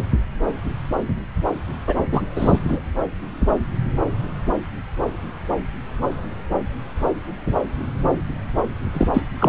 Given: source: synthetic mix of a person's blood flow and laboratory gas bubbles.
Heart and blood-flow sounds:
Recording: Doppler ultrasound of blood flow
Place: subclavian vein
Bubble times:
1.87-1.95 s: bubbles
2.12-2.22 s: bubbles
2.35-2.60 s: bubbles
2.68-2.80 s: bubbles
8.94-9.07 s: bubbles
9.13-9.25 s: bubbles
9.39-9.49 s: bubbles
From the record:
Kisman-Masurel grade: 223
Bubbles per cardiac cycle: several, 3 to 8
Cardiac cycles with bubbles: 10 to 50%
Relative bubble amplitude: loud (0.450 to 0.775)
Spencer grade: 2 (many but less than half of the cardiac periods contain bubble signals, singularly or in groups)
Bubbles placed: anywhere in the cardiac cycle

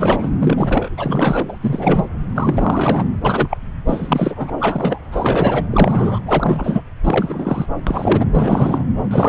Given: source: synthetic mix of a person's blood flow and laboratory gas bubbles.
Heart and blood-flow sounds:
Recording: Doppler ultrasound of blood flow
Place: subclavian vein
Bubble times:
0.00-0.30 s: bubbles
0.39-0.89 s: bubbles
0.97-1.56 s: bubbles
1.60-2.04 s: bubbles
2.35-3.09 s: bubbles
3.25-3.58 s: bubbles
3.87-4.50 s: bubbles
4.59-5.00 s: bubbles
5.12-5.65 s: bubbles
5.71-6.19 s: bubbles
6.25-6.82 s: bubbles
7.04-7.66 s: bubbles
7.86-8.25 s: bubbles
8.30-8.84 s: bubbles
9.10-9.29 s: bubbles
From the record:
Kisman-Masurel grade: 343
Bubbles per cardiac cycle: rolling drumbeat, 9 or more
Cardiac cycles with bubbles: 100%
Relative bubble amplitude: loud (0.450 to 0.775)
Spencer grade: 3 (all of the cardiac periods contain showers or single bubble signals, but not dominating or overriding the cardiac motion signals)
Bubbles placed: anywhere in the cardiac cycle

